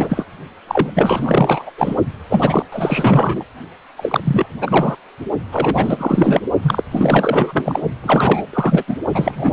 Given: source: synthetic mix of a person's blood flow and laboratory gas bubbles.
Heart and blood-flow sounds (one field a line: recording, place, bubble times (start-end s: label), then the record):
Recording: Doppler ultrasound of blood flow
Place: precordium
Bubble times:
0.00-0.25 s: bubbles
0.67-0.90 s: bubbles
0.94-1.70 s: bubbles
1.77-1.95 s: bubbles
2.29-2.65 s: bubbles
2.72-3.44 s: bubbles
3.96-4.46 s: bubbles
4.61-4.96 s: bubbles
5.51-6.41 s: bubbles
6.62-6.83 s: bubbles
6.91-7.80 s: bubbles
8.03-8.43 s: bubbles
8.53-8.84 s: bubbles
8.87-8.97 s: bubbles
9.14-9.53 s: bubbles
From the record:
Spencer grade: 4 (maximum detectable bubble signal sounding continuously throughout systole and diastole of every cardiac period, and overriding the amplitude of the normal cardiac signals)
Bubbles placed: only in the low amplitude regions of the cardiac cycle